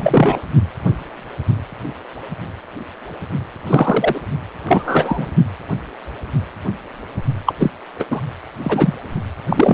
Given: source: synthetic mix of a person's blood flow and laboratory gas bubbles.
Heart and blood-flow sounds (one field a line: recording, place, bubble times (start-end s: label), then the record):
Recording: Doppler ultrasound of blood flow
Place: precordium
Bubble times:
0.00-0.40 s: bubbles
3.67-4.20 s: bubbles
4.67-5.27 s: bubbles
7.46-7.53 s: bubbles
7.59-7.71 s: bubbles
7.99-8.04 s: bubbles
8.10-8.21 s: bubbles
8.62-8.92 s: bubbles
9.49-9.74 s: bubbles
From the record:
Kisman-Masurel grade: 233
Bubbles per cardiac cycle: several, 3 to 8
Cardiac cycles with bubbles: 50 to 99%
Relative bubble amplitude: loud (0.450 to 0.775)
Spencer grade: 3 (all of the cardiac periods contain showers or single bubble signals, but not dominating or overriding the cardiac motion signals)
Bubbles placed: only in the low amplitude regions of the cardiac cycle